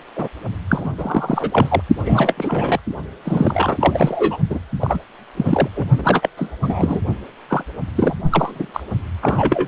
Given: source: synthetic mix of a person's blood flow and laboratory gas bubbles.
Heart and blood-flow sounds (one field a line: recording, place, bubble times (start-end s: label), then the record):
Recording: Doppler ultrasound of blood flow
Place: precordium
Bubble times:
0.16-0.28 s: bubbles
0.69-0.93 s: bubbles
0.98-1.81 s: bubbles
2.04-2.33 s: bubbles
2.37-2.79 s: bubbles
3.25-4.37 s: bubbles
4.50-4.59 s: bubbles
4.79-4.99 s: bubbles
5.37-5.69 s: bubbles
5.75-5.84 s: bubbles
5.97-6.29 s: bubbles
6.37-6.51 s: bubbles
6.62-7.00 s: bubbles
7.49-7.63 s: bubbles
7.94-8.15 s: bubbles
8.30-8.71 s: bubbles
8.73-8.83 s: bubbles
9.21-9.68 s: bubbles
From the record:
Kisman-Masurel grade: 343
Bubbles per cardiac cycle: rolling drumbeat, 9 or more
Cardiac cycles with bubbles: 100%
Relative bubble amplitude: loud (0.450 to 0.775)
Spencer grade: 3 (all of the cardiac periods contain showers or single bubble signals, but not dominating or overriding the cardiac motion signals)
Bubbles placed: only in the low amplitude regions of the cardiac cycle